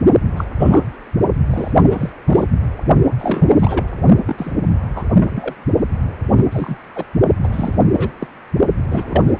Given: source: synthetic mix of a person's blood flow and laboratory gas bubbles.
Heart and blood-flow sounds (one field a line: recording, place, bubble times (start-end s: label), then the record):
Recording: Doppler ultrasound of blood flow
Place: precordium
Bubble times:
0.36-0.45 s: bubbles
0.58-0.83 s: bubbles
1.50-1.72 s: bubbles
1.80-2.10 s: bubbles
2.26-2.43 s: bubbles
3.18-3.84 s: bubbles
4.25-4.54 s: bubbles
4.95-5.05 s: bubbles
5.18-5.54 s: bubbles
6.35-6.43 s: bubbles
6.50-6.79 s: bubbles
6.96-7.04 s: bubbles
7.42-7.49 s: bubbles
7.52-7.79 s: bubbles
7.93-8.12 s: bubbles
8.20-8.27 s: bubbles
8.88-9.22 s: bubbles
9.27-9.33 s: bubbles
From the record:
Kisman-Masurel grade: 242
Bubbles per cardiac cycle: several, 3 to 8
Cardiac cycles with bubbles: 100%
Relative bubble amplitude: moderate (0.250 to 0.450)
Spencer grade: 3 (all of the cardiac periods contain showers or single bubble signals, but not dominating or overriding the cardiac motion signals)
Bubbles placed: only in the low amplitude regions of the cardiac cycle